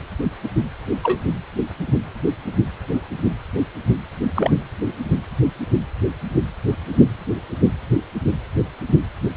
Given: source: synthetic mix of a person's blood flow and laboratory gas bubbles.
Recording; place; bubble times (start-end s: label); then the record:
Doppler ultrasound of blood flow; precordium
1.03-1.20 s: bubbles
4.34-4.51 s: bubbles
From the record:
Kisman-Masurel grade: 122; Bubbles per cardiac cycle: 1 to 2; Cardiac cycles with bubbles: 10 to 50%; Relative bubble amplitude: moderate (0.250 to 0.450); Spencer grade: 2 (many but less than half of the cardiac periods contain bubble signals, singularly or in groups); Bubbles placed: anywhere in the cardiac cycle